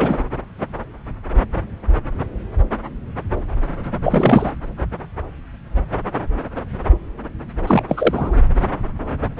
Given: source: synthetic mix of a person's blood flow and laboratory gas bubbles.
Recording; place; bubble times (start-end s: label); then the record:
Doppler ultrasound of blood flow; subclavian vein
0.00-0.20 s: bubbles
4.04-4.51 s: bubbles
7.67-7.83 s: bubbles
7.88-8.35 s: bubbles
From the record:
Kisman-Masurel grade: 223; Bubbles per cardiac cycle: several, 3 to 8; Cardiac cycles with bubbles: 10 to 50%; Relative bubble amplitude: loud (0.450 to 0.775); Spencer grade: 2 (many but less than half of the cardiac periods contain bubble signals, singularly or in groups); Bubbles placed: anywhere in the cardiac cycle